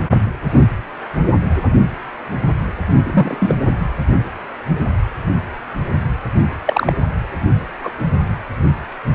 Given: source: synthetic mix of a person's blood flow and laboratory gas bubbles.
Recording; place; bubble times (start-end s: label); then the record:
Doppler ultrasound of blood flow; precordium
3.02-3.55 s: bubbles
6.65-6.93 s: bubbles
7.83-7.92 s: bubbles
From the record:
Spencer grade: 2 (many but less than half of the cardiac periods contain bubble signals, singularly or in groups); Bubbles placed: anywhere in the cardiac cycle